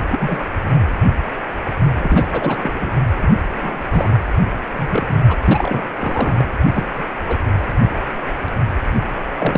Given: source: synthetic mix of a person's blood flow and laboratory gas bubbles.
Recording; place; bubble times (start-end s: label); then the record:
Doppler ultrasound of blood flow; precordium
0.10-0.41 s: bubbles
1.97-2.26 s: bubbles
2.31-2.90 s: bubbles
3.20-3.31 s: bubbles
3.54-3.76 s: bubbles
3.90-4.13 s: bubbles
4.75-5.18 s: bubbles
5.28-5.37 s: bubbles
5.44-5.95 s: bubbles
6.00-6.48 s: bubbles
6.64-7.04 s: bubbles
7.27-7.38 s: bubbles
9.38-9.58 s: bubbles
From the record:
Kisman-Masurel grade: 232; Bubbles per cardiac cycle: several, 3 to 8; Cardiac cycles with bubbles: 50 to 99%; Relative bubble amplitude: moderate (0.250 to 0.450); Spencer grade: 3 (all of the cardiac periods contain showers or single bubble signals, but not dominating or overriding the cardiac motion signals); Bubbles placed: anywhere in the cardiac cycle